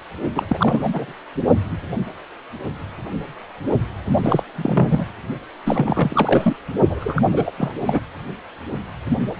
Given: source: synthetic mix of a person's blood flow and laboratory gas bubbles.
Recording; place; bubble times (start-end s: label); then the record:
Doppler ultrasound of blood flow; precordium
0.35-0.80 s: bubbles
0.83-1.12 s: bubbles
4.22-4.43 s: bubbles
4.55-5.11 s: bubbles
5.66-6.56 s: bubbles
6.90-7.22 s: bubbles
7.32-7.51 s: bubbles
7.58-7.72 s: bubbles
7.76-8.00 s: bubbles
From the record:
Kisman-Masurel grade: 332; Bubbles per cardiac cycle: rolling drumbeat, 9 or more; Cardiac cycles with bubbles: 50 to 99%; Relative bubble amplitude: moderate (0.250 to 0.450); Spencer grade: 3 (all of the cardiac periods contain showers or single bubble signals, but not dominating or overriding the cardiac motion signals); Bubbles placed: only in the low amplitude regions of the cardiac cycle